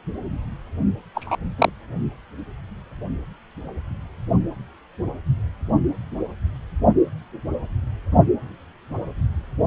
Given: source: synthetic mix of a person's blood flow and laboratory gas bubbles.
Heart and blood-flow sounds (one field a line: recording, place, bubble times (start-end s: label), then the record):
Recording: Doppler ultrasound of blood flow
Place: precordium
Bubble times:
1.15-1.36 s: bubbles
1.58-1.69 s: bubbles
From the record:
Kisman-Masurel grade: 113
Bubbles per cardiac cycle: 1 to 2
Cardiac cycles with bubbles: 1 to 10%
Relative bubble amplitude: loud (0.450 to 0.775)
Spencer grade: 1 (occasional bubble signal discernible with the cardiac motion signal, with majority of cardiac periods free of bubbles)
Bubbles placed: only in the low amplitude regions of the cardiac cycle